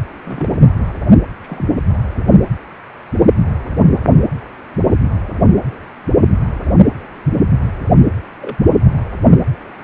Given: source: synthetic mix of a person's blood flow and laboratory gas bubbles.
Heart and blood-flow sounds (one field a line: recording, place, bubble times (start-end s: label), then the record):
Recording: Doppler ultrasound of blood flow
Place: precordium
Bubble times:
0.24-0.55 s: bubbles
1.42-1.79 s: bubbles
6.64-6.73 s: bubbles
8.41-8.56 s: bubbles
From the record:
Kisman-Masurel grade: 121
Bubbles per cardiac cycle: 1 to 2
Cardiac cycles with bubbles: 10 to 50%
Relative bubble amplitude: barely perceptible (0.100 to 0.250)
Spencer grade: 2 (many but less than half of the cardiac periods contain bubble signals, singularly or in groups)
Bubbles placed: anywhere in the cardiac cycle